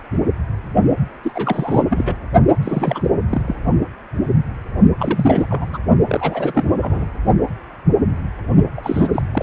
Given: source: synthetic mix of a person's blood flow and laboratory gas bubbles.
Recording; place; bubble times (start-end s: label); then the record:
Doppler ultrasound of blood flow; precordium
1.23-1.32 s: bubbles
1.34-1.82 s: bubbles
1.89-2.16 s: bubbles
2.62-3.10 s: bubbles
3.29-3.42 s: bubbles
3.47-3.56 s: bubbles
4.98-5.46 s: bubbles
5.50-5.78 s: bubbles
6.07-6.71 s: bubbles
6.81-7.06 s: bubbles
8.77-9.22 s: bubbles
9.33-9.43 s: bubbles
From the record:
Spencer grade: 3 (all of the cardiac periods contain showers or single bubble signals, but not dominating or overriding the cardiac motion signals); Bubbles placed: only in the low amplitude regions of the cardiac cycle